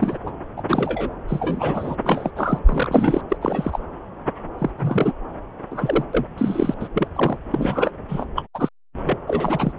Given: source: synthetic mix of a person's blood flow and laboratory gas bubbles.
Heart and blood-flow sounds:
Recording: Doppler ultrasound of blood flow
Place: subclavian vein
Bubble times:
0.00-0.17 s: bubbles
0.26-0.32 s: bubbles
0.57-0.62 s: bubbles
0.69-1.10 s: bubbles
1.27-1.96 s: bubbles
2.04-2.32 s: bubbles
2.36-2.59 s: bubbles
2.66-3.21 s: bubbles
3.29-3.37 s: bubbles
3.41-3.80 s: bubbles
4.58-4.71 s: bubbles
4.78-5.12 s: bubbles
5.71-6.04 s: bubbles
6.13-6.26 s: bubbles
6.38-6.74 s: bubbles
6.79-6.88 s: bubbles
6.94-7.08 s: bubbles
7.15-7.38 s: bubbles
7.51-7.91 s: bubbles
8.08-8.24 s: bubbles
8.36-8.44 s: bubbles
8.54-8.69 s: bubbles
9.04-9.18 s: bubbles
9.27-9.72 s: bubbles
From the record:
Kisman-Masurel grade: 233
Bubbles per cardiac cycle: several, 3 to 8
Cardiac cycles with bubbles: 50 to 99%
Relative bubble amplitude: loud (0.450 to 0.775)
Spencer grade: 3 (all of the cardiac periods contain showers or single bubble signals, but not dominating or overriding the cardiac motion signals)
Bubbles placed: anywhere in the cardiac cycle

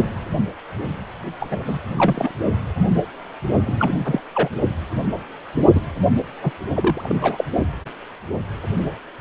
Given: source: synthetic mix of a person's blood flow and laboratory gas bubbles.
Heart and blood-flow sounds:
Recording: Doppler ultrasound of blood flow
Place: precordium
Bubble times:
1.40-1.79 s: bubbles
1.96-2.31 s: bubbles
3.66-4.00 s: bubbles
4.04-4.20 s: bubbles
4.34-4.50 s: bubbles
5.75-5.80 s: bubbles
6.42-6.51 s: bubbles
6.68-7.44 s: bubbles
From the record:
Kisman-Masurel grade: 222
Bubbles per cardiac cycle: several, 3 to 8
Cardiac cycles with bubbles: 10 to 50%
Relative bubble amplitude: moderate (0.250 to 0.450)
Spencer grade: 2 (many but less than half of the cardiac periods contain bubble signals, singularly or in groups)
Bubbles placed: only in the low amplitude regions of the cardiac cycle

